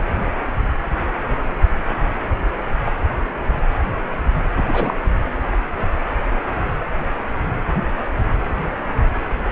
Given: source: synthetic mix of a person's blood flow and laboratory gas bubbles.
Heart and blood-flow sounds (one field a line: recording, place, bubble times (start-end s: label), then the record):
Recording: Doppler ultrasound of blood flow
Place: precordium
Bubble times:
4.57-4.63 s: bubbles
4.67-4.94 s: bubbles
From the record:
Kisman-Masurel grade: 212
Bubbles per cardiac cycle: several, 3 to 8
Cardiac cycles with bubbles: 1 to 10%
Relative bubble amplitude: moderate (0.250 to 0.450)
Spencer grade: 1 (occasional bubble signal discernible with the cardiac motion signal, with majority of cardiac periods free of bubbles)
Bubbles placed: anywhere in the cardiac cycle